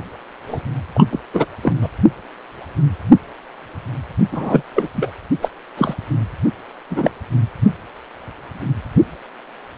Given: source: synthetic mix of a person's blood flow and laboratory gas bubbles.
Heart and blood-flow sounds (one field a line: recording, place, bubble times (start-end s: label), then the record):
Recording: Doppler ultrasound of blood flow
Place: precordium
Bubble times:
0.48-0.63 s: bubbles
0.94-1.06 s: bubbles
1.11-1.19 s: bubbles
1.33-1.46 s: bubbles
1.62-1.73 s: bubbles
1.81-1.89 s: bubbles
4.32-4.62 s: bubbles
4.74-4.88 s: bubbles
4.96-5.10 s: bubbles
5.42-5.50 s: bubbles
5.77-5.94 s: bubbles
6.90-7.10 s: bubbles
From the record:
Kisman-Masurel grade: 223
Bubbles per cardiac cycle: several, 3 to 8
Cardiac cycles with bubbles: 10 to 50%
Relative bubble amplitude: loud (0.450 to 0.775)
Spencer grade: 2 (many but less than half of the cardiac periods contain bubble signals, singularly or in groups)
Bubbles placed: only in the low amplitude regions of the cardiac cycle